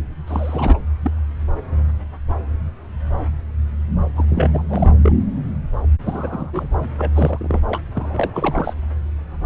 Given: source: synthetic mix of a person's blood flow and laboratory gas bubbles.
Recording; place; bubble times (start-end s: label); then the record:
Doppler ultrasound of blood flow; subclavian vein
0.27-0.78 s: bubbles
1.03-1.11 s: bubbles
4.16-4.25 s: bubbles
4.29-4.62 s: bubbles
4.69-4.95 s: bubbles
5.02-5.12 s: bubbles
6.04-6.50 s: bubbles
6.53-6.68 s: bubbles
6.98-7.11 s: bubbles
7.14-7.62 s: bubbles
7.70-7.79 s: bubbles
7.95-8.73 s: bubbles
From the record:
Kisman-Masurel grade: 332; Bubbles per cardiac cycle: rolling drumbeat, 9 or more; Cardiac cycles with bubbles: 50 to 99%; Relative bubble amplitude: moderate (0.250 to 0.450); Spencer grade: 3 (all of the cardiac periods contain showers or single bubble signals, but not dominating or overriding the cardiac motion signals); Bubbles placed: anywhere in the cardiac cycle